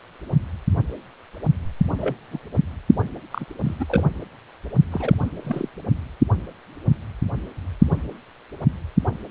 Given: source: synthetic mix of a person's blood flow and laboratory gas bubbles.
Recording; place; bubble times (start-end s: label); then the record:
Doppler ultrasound of blood flow; precordium
1.97-2.16 s: bubbles
2.32-2.38 s: bubbles
3.31-3.45 s: bubbles
3.63-3.75 s: bubbles
3.79-3.85 s: bubbles
3.88-4.04 s: bubbles
4.92-5.17 s: bubbles
5.43-5.69 s: bubbles
From the record:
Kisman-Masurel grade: 221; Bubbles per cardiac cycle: several, 3 to 8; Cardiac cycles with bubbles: 10 to 50%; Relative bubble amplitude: barely perceptible (0.100 to 0.250); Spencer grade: 2 (many but less than half of the cardiac periods contain bubble signals, singularly or in groups); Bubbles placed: only in the low amplitude regions of the cardiac cycle